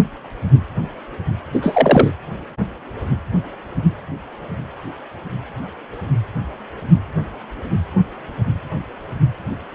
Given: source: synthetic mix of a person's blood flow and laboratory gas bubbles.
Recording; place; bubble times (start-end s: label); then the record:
Doppler ultrasound of blood flow; precordium
1.53-2.12 s: bubbles
From the record:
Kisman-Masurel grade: 213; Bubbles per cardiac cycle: several, 3 to 8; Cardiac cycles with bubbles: 1 to 10%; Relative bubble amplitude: loud (0.450 to 0.775); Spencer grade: 1 (occasional bubble signal discernible with the cardiac motion signal, with majority of cardiac periods free of bubbles); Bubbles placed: anywhere in the cardiac cycle